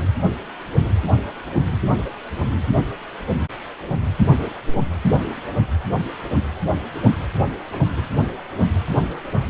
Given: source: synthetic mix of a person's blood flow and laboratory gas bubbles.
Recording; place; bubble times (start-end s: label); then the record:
Doppler ultrasound of blood flow; precordium
7.71-7.79 s: bubbles
7.96-8.01 s: bubbles
From the record:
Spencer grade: 1 (occasional bubble signal discernible with the cardiac motion signal, with majority of cardiac periods free of bubbles); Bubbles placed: anywhere in the cardiac cycle